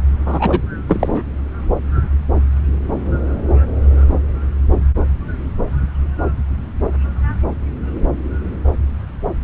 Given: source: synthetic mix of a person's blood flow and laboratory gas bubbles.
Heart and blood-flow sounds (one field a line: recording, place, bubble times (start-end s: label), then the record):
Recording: Doppler ultrasound of blood flow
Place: subclavian vein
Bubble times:
0.26-0.60 s: bubbles
0.88-1.22 s: bubbles
From the record:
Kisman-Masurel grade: 213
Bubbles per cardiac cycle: several, 3 to 8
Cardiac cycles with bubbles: 1 to 10%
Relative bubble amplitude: loud (0.450 to 0.775)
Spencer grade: 1 (occasional bubble signal discernible with the cardiac motion signal, with majority of cardiac periods free of bubbles)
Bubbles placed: anywhere in the cardiac cycle